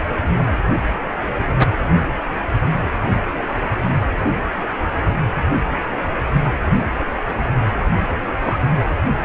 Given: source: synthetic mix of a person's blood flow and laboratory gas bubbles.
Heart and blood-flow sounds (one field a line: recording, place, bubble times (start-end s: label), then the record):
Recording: Doppler ultrasound of blood flow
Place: precordium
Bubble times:
8.41-8.58 s: bubbles
From the record:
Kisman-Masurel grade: 112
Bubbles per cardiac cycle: 1 to 2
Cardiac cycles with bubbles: 1 to 10%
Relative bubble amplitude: moderate (0.250 to 0.450)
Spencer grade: 1 (occasional bubble signal discernible with the cardiac motion signal, with majority of cardiac periods free of bubbles)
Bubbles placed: anywhere in the cardiac cycle